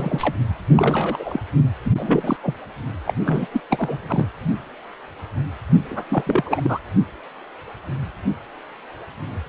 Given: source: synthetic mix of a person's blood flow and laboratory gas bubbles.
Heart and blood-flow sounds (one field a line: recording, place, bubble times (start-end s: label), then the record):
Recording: Doppler ultrasound of blood flow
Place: precordium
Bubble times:
0.00-0.34 s: bubbles
0.74-1.40 s: bubbles
1.84-1.91 s: bubbles
1.98-2.37 s: bubbles
2.43-2.54 s: bubbles
3.06-3.14 s: bubbles
3.25-3.47 s: bubbles
3.52-3.60 s: bubbles
3.70-4.26 s: bubbles
5.91-6.05 s: bubbles
6.09-6.24 s: bubbles
6.27-6.43 s: bubbles
6.46-6.79 s: bubbles
From the record:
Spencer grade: 3 (all of the cardiac periods contain showers or single bubble signals, but not dominating or overriding the cardiac motion signals)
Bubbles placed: anywhere in the cardiac cycle